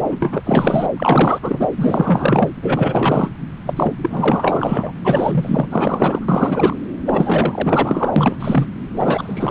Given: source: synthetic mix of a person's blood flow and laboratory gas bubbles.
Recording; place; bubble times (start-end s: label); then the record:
Doppler ultrasound of blood flow; subclavian vein
0.00-0.18 s: bubbles
0.22-0.89 s: bubbles
0.97-1.39 s: bubbles
1.42-1.68 s: bubbles
1.76-2.50 s: bubbles
2.62-3.29 s: bubbles
3.66-3.73 s: bubbles
3.76-3.94 s: bubbles
4.02-4.92 s: bubbles
5.04-5.67 s: bubbles
5.71-6.76 s: bubbles
7.05-8.12 s: bubbles
8.16-8.36 s: bubbles
8.39-8.67 s: bubbles
8.94-9.51 s: bubbles
From the record:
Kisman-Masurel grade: 444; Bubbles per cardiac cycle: continuous sound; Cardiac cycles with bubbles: 100%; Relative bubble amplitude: maximal (0.775 to 0.999); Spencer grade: 4 (maximum detectable bubble signal sounding continuously throughout systole and diastole of every cardiac period, and overriding the amplitude of the normal cardiac signals); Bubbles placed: anywhere in the cardiac cycle